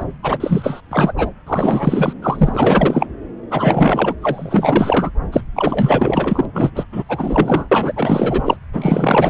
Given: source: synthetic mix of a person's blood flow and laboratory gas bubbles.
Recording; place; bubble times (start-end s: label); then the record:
Doppler ultrasound of blood flow; subclavian vein
0.00-0.04 s: bubbles
0.22-0.81 s: bubbles
0.90-1.12 s: bubbles
1.17-1.30 s: bubbles
1.46-2.13 s: bubbles
2.21-3.06 s: bubbles
3.50-4.14 s: bubbles
4.21-5.10 s: bubbles
5.32-5.41 s: bubbles
5.55-6.46 s: bubbles
6.52-6.70 s: bubbles
6.75-6.85 s: bubbles
6.92-7.04 s: bubbles
7.08-7.92 s: bubbles
7.96-8.57 s: bubbles
8.73-9.30 s: bubbles
From the record:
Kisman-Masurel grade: 444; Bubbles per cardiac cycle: continuous sound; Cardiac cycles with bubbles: 100%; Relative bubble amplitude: maximal (0.775 to 0.999); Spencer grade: 4 (maximum detectable bubble signal sounding continuously throughout systole and diastole of every cardiac period, and overriding the amplitude of the normal cardiac signals); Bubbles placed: anywhere in the cardiac cycle